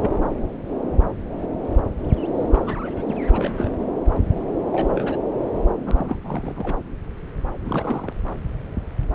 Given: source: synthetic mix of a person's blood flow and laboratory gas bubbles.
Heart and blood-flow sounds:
Doppler ultrasound of blood flow; subclavian vein
0.02-0.11 s: bubbles
2.50-2.80 s: bubbles
2.83-3.16 s: bubbles
3.29-3.71 s: bubbles
4.71-5.18 s: bubbles
5.85-6.17 s: bubbles
6.22-6.77 s: bubbles
7.59-8.12 s: bubbles
From the record:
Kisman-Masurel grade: 221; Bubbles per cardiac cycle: several, 3 to 8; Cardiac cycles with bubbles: 10 to 50%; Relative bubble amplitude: barely perceptible (0.100 to 0.250); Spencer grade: 2 (many but less than half of the cardiac periods contain bubble signals, singularly or in groups); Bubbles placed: anywhere in the cardiac cycle

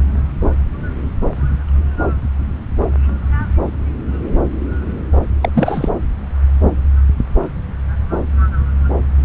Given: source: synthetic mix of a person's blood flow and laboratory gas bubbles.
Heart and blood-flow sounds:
Doppler ultrasound of blood flow; subclavian vein
5.41-5.50 s: bubbles
5.54-5.89 s: bubbles
From the record:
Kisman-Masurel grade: 213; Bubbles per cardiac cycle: several, 3 to 8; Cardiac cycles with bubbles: 1 to 10%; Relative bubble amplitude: loud (0.450 to 0.775); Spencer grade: 1 (occasional bubble signal discernible with the cardiac motion signal, with majority of cardiac periods free of bubbles); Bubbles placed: anywhere in the cardiac cycle

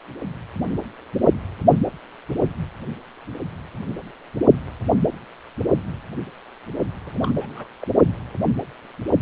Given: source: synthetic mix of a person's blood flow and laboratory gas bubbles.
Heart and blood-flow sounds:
Doppler ultrasound of blood flow; precordium
7.05-7.31 s: bubbles
7.39-7.66 s: bubbles
7.81-7.86 s: bubbles
From the record:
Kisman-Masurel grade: 221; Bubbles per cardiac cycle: several, 3 to 8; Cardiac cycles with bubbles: 10 to 50%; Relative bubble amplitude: barely perceptible (0.100 to 0.250); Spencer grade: 2 (many but less than half of the cardiac periods contain bubble signals, singularly or in groups); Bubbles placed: only in the low amplitude regions of the cardiac cycle

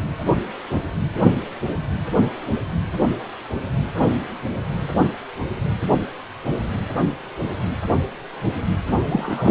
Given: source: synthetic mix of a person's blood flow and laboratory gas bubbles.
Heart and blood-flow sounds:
Doppler ultrasound of blood flow; precordium
9.09-9.51 s: bubbles
From the record:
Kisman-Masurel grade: 212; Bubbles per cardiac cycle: several, 3 to 8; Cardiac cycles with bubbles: 1 to 10%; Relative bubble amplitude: moderate (0.250 to 0.450); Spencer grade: 1 (occasional bubble signal discernible with the cardiac motion signal, with majority of cardiac periods free of bubbles); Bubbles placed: only in the low amplitude regions of the cardiac cycle

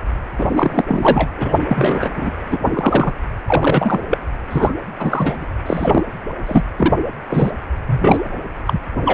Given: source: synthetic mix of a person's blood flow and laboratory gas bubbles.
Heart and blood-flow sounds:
Doppler ultrasound of blood flow; precordium
0.38-0.85 s: bubbles
0.87-1.30 s: bubbles
1.37-1.63 s: bubbles
1.68-2.11 s: bubbles
2.15-2.31 s: bubbles
2.50-3.13 s: bubbles
3.48-4.00 s: bubbles
4.10-4.18 s: bubbles
4.50-4.74 s: bubbles
4.98-5.45 s: bubbles
5.66-6.02 s: bubbles
6.47-6.65 s: bubbles
6.78-6.93 s: bubbles
7.30-7.52 s: bubbles
7.85-8.21 s: bubbles
8.65-8.79 s: bubbles
9.04-9.14 s: bubbles
From the record:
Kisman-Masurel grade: 233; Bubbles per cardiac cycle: several, 3 to 8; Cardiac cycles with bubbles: 50 to 99%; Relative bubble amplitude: loud (0.450 to 0.775); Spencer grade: 3 (all of the cardiac periods contain showers or single bubble signals, but not dominating or overriding the cardiac motion signals); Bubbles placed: anywhere in the cardiac cycle

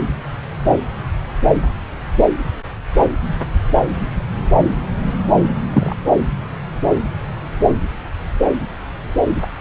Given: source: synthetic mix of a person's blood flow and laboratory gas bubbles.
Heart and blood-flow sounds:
Doppler ultrasound of blood flow; subclavian vein
5.74-5.95 s: bubbles
From the record:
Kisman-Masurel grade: 113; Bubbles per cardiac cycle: 1 to 2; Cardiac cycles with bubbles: 1 to 10%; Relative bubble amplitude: loud (0.450 to 0.775); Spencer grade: 1 (occasional bubble signal discernible with the cardiac motion signal, with majority of cardiac periods free of bubbles); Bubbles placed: anywhere in the cardiac cycle

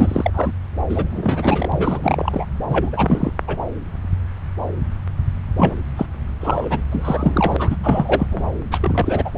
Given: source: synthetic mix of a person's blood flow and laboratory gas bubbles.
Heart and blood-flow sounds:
Doppler ultrasound of blood flow; subclavian vein
0.00-0.31 s: bubbles
0.34-0.52 s: bubbles
0.89-2.46 s: bubbles
2.70-3.31 s: bubbles
3.47-3.56 s: bubbles
5.57-5.75 s: bubbles
5.96-6.06 s: bubbles
6.40-6.84 s: bubbles
6.92-7.76 s: bubbles
7.83-8.27 s: bubbles
8.30-8.43 s: bubbles
8.71-9.31 s: bubbles
9.36-9.38 s: bubbles
From the record:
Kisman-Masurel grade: 333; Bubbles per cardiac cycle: rolling drumbeat, 9 or more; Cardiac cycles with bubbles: 50 to 99%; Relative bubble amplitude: loud (0.450 to 0.775); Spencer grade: 3 (all of the cardiac periods contain showers or single bubble signals, but not dominating or overriding the cardiac motion signals); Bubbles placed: anywhere in the cardiac cycle

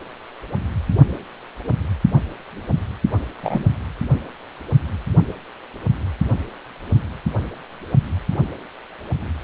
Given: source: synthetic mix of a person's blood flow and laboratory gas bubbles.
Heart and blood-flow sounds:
Doppler ultrasound of blood flow; precordium
3.43-3.64 s: bubbles
From the record:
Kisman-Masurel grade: 123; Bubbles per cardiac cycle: 1 to 2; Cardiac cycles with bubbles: 10 to 50%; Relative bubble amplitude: loud (0.450 to 0.775); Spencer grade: 2 (many but less than half of the cardiac periods contain bubble signals, singularly or in groups); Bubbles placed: only in the low amplitude regions of the cardiac cycle

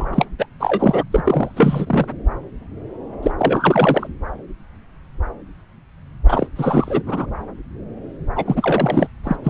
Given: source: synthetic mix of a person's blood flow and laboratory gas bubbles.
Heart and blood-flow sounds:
Doppler ultrasound of blood flow; subclavian vein
0.00-0.26 s: bubbles
0.38-0.46 s: bubbles
0.59-1.04 s: bubbles
1.12-2.06 s: bubbles
3.22-3.31 s: bubbles
3.38-4.07 s: bubbles
6.26-6.47 s: bubbles
6.56-7.03 s: bubbles
7.06-7.26 s: bubbles
8.36-9.08 s: bubbles
9.23-9.36 s: bubbles
9.44-9.50 s: bubbles
From the record:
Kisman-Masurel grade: 333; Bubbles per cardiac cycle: rolling drumbeat, 9 or more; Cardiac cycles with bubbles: 50 to 99%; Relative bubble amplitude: loud (0.450 to 0.775); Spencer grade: 3 (all of the cardiac periods contain showers or single bubble signals, but not dominating or overriding the cardiac motion signals); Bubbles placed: anywhere in the cardiac cycle

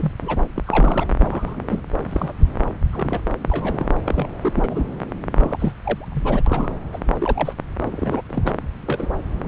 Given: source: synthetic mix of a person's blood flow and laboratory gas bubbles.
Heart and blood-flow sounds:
Doppler ultrasound of blood flow; subclavian vein
0.00-0.12 s: bubbles
0.21-0.42 s: bubbles
0.56-1.09 s: bubbles
1.19-1.83 s: bubbles
2.09-2.33 s: bubbles
2.93-3.23 s: bubbles
3.42-3.87 s: bubbles
4.05-4.28 s: bubbles
4.43-4.83 s: bubbles
5.34-5.72 s: bubbles
5.82-6.09 s: bubbles
6.12-6.44 s: bubbles
6.46-6.78 s: bubbles
6.92-6.99 s: bubbles
7.19-7.53 s: bubbles
7.84-8.21 s: bubbles
8.29-8.53 s: bubbles
8.86-9.09 s: bubbles
From the record:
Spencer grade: 3 (all of the cardiac periods contain showers or single bubble signals, but not dominating or overriding the cardiac motion signals); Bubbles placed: anywhere in the cardiac cycle

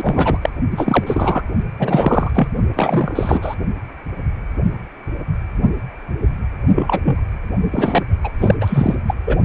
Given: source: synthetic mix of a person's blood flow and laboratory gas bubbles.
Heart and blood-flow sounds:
Doppler ultrasound of blood flow; precordium
0.00-0.38 s: bubbles
0.41-0.50 s: bubbles
0.71-1.42 s: bubbles
1.79-2.31 s: bubbles
2.34-2.48 s: bubbles
2.73-3.55 s: bubbles
6.75-7.01 s: bubbles
7.05-7.20 s: bubbles
7.72-8.03 s: bubbles
8.23-8.31 s: bubbles
8.40-8.55 s: bubbles
8.60-8.95 s: bubbles
9.07-9.14 s: bubbles
9.26-9.37 s: bubbles
From the record:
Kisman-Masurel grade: 333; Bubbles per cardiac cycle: rolling drumbeat, 9 or more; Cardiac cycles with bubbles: 50 to 99%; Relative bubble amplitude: loud (0.450 to 0.775); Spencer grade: 3 (all of the cardiac periods contain showers or single bubble signals, but not dominating or overriding the cardiac motion signals); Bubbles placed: only in the low amplitude regions of the cardiac cycle

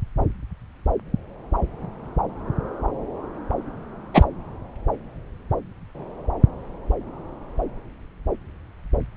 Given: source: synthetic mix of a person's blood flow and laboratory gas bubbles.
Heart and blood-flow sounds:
Doppler ultrasound of blood flow; subclavian vein
4.13-4.24 s: bubbles
From the record:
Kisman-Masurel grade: 113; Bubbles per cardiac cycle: 1 to 2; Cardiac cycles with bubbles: 1 to 10%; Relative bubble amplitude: loud (0.450 to 0.775); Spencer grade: 1 (occasional bubble signal discernible with the cardiac motion signal, with majority of cardiac periods free of bubbles); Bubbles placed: anywhere in the cardiac cycle

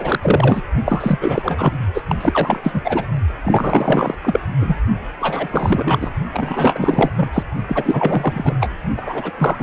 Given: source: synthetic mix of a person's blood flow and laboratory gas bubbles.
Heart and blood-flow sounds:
Doppler ultrasound of blood flow; precordium
0.00-0.19 s: bubbles
0.22-0.62 s: bubbles
0.85-1.72 s: bubbles
1.94-2.02 s: bubbles
2.07-2.15 s: bubbles
2.20-2.81 s: bubbles
2.83-3.07 s: bubbles
3.44-4.15 s: bubbles
4.23-4.40 s: bubbles
4.60-4.76 s: bubbles
5.21-6.10 s: bubbles
6.33-7.11 s: bubbles
7.15-7.30 s: bubbles
7.33-7.43 s: bubbles
7.68-8.54 s: bubbles
8.60-8.71 s: bubbles
8.96-9.31 s: bubbles
9.37-9.63 s: bubbles
From the record:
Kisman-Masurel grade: 444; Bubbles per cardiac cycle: continuous sound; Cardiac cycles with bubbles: 100%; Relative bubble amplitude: maximal (0.775 to 0.999); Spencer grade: 4 (maximum detectable bubble signal sounding continuously throughout systole and diastole of every cardiac period, and overriding the amplitude of the normal cardiac signals); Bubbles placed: only in the low amplitude regions of the cardiac cycle

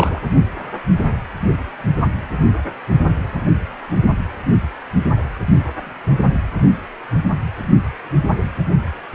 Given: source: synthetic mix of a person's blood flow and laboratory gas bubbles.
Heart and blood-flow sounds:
Doppler ultrasound of blood flow; precordium
0.00-0.21 s: bubbles
From the record:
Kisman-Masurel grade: 212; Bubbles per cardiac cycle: several, 3 to 8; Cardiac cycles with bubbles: 1 to 10%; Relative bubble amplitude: moderate (0.250 to 0.450); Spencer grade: 1 (occasional bubble signal discernible with the cardiac motion signal, with majority of cardiac periods free of bubbles); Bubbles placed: only in the low amplitude regions of the cardiac cycle

